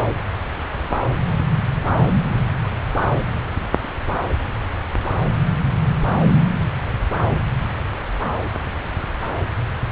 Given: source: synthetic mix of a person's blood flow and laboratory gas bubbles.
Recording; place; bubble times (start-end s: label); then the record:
Doppler ultrasound of blood flow; subclavian vein
no bubbles
From the record:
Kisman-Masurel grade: 000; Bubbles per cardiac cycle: 0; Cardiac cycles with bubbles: 0%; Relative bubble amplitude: no bubbles discernible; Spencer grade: 0 (complete lack of bubble signals)